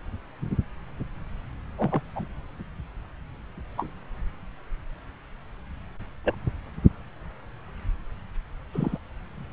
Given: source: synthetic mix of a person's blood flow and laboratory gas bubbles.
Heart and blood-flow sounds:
Doppler ultrasound of blood flow; subclavian vein
1.78-2.01 s: bubbles
2.16-2.22 s: bubbles
3.78-3.90 s: bubbles
6.25-6.35 s: bubbles
8.72-8.98 s: bubbles
From the record:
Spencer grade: 2 (many but less than half of the cardiac periods contain bubble signals, singularly or in groups); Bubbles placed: anywhere in the cardiac cycle

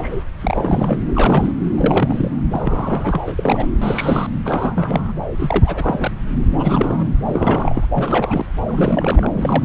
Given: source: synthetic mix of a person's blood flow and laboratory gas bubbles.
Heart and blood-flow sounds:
Doppler ultrasound of blood flow; subclavian vein
0.00-0.24 s: bubbles
0.42-0.99 s: bubbles
1.09-1.51 s: bubbles
1.76-2.30 s: bubbles
2.51-3.21 s: bubbles
3.28-3.67 s: bubbles
3.81-4.27 s: bubbles
4.44-5.12 s: bubbles
5.37-6.12 s: bubbles
6.51-7.06 s: bubbles
7.25-7.86 s: bubbles
7.94-8.46 s: bubbles
8.67-9.28 s: bubbles
9.36-9.65 s: bubbles
From the record:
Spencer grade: 3 (all of the cardiac periods contain showers or single bubble signals, but not dominating or overriding the cardiac motion signals); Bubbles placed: anywhere in the cardiac cycle

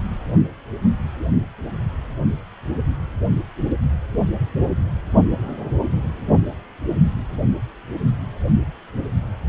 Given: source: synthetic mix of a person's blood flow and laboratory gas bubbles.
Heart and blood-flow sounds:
Doppler ultrasound of blood flow; precordium
no bubbles
From the record:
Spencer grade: 0 (complete lack of bubble signals)

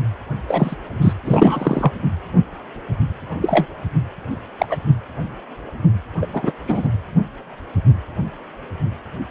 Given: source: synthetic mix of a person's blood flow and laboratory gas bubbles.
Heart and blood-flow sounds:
Doppler ultrasound of blood flow; precordium
0.48-0.76 s: bubbles
1.01-1.13 s: bubbles
1.24-1.92 s: bubbles
3.42-3.66 s: bubbles
4.58-4.66 s: bubbles
4.70-4.77 s: bubbles
6.21-6.27 s: bubbles
6.33-6.52 s: bubbles
6.67-6.88 s: bubbles
From the record:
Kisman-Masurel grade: 223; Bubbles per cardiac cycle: several, 3 to 8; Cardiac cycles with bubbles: 10 to 50%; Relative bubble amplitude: loud (0.450 to 0.775); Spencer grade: 2 (many but less than half of the cardiac periods contain bubble signals, singularly or in groups); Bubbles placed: anywhere in the cardiac cycle

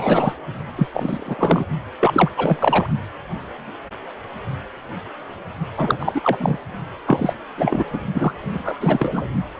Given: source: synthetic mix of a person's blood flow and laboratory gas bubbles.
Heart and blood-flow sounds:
Doppler ultrasound of blood flow; precordium
0.00-0.33 s: bubbles
0.76-0.88 s: bubbles
0.93-1.65 s: bubbles
2.01-2.29 s: bubbles
2.37-2.88 s: bubbles
5.77-6.21 s: bubbles
6.23-6.58 s: bubbles
7.07-7.33 s: bubbles
7.58-7.85 s: bubbles
7.93-7.99 s: bubbles
8.14-8.34 s: bubbles
8.50-9.23 s: bubbles
From the record:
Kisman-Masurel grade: 332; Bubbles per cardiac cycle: rolling drumbeat, 9 or more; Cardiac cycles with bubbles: 50 to 99%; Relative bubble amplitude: moderate (0.250 to 0.450); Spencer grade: 3 (all of the cardiac periods contain showers or single bubble signals, but not dominating or overriding the cardiac motion signals); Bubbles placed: only in the low amplitude regions of the cardiac cycle

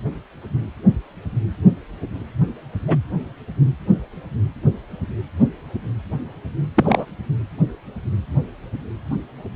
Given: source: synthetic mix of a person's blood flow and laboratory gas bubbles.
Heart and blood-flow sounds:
Doppler ultrasound of blood flow; precordium
2.87-2.97 s: bubbles
6.75-7.05 s: bubbles
From the record:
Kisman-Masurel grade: 123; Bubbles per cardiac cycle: 1 to 2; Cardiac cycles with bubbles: 10 to 50%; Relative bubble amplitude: loud (0.450 to 0.775); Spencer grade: 2 (many but less than half of the cardiac periods contain bubble signals, singularly or in groups); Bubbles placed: anywhere in the cardiac cycle

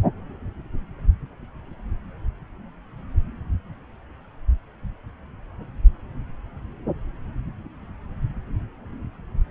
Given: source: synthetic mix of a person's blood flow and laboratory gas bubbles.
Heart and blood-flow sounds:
Doppler ultrasound of blood flow; subclavian vein
no bubbles
From the record:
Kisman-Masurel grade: 000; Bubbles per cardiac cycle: 0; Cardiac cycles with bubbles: 0%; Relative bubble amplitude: no bubbles discernible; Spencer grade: 0 (complete lack of bubble signals)

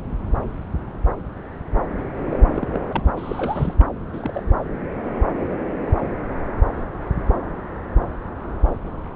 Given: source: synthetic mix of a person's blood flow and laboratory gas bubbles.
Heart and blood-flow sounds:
Doppler ultrasound of blood flow; subclavian vein
2.31-2.40 s: bubbles
2.46-2.81 s: bubbles
2.94-3.10 s: bubbles
3.17-3.75 s: bubbles
3.79-3.84 s: bubbles
4.12-4.42 s: bubbles
From the record:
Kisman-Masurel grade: 221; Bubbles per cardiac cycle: several, 3 to 8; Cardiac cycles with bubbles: 10 to 50%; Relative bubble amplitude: barely perceptible (0.100 to 0.250); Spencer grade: 2 (many but less than half of the cardiac periods contain bubble signals, singularly or in groups); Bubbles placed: anywhere in the cardiac cycle

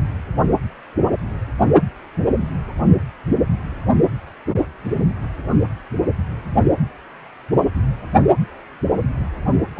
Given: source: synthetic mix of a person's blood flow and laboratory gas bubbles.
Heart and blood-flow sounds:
Doppler ultrasound of blood flow; precordium
9.75-9.80 s: bubbles
From the record:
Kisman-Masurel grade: 211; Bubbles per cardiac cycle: several, 3 to 8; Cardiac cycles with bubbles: 1 to 10%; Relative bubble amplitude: barely perceptible (0.100 to 0.250); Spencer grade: 1 (occasional bubble signal discernible with the cardiac motion signal, with majority of cardiac periods free of bubbles); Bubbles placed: only in the low amplitude regions of the cardiac cycle

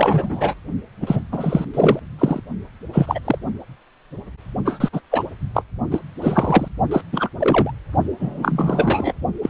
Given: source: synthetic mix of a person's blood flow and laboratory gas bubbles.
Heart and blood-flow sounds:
Doppler ultrasound of blood flow; precordium
0.00-0.54 s: bubbles
1.02-1.21 s: bubbles
1.31-1.65 s: bubbles
1.74-2.00 s: bubbles
2.19-2.40 s: bubbles
2.93-3.20 s: bubbles
3.25-3.38 s: bubbles
4.65-4.88 s: bubbles
4.92-5.00 s: bubbles
5.11-5.23 s: bubbles
5.54-5.62 s: bubbles
5.90-6.00 s: bubbles
6.21-6.68 s: bubbles
6.91-7.01 s: bubbles
7.12-7.29 s: bubbles
7.39-7.71 s: bubbles
8.19-9.13 s: bubbles
9.42-9.50 s: bubbles
From the record:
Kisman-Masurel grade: 233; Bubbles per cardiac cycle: several, 3 to 8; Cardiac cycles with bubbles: 50 to 99%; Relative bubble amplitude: loud (0.450 to 0.775); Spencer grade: 3 (all of the cardiac periods contain showers or single bubble signals, but not dominating or overriding the cardiac motion signals); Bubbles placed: only in the low amplitude regions of the cardiac cycle

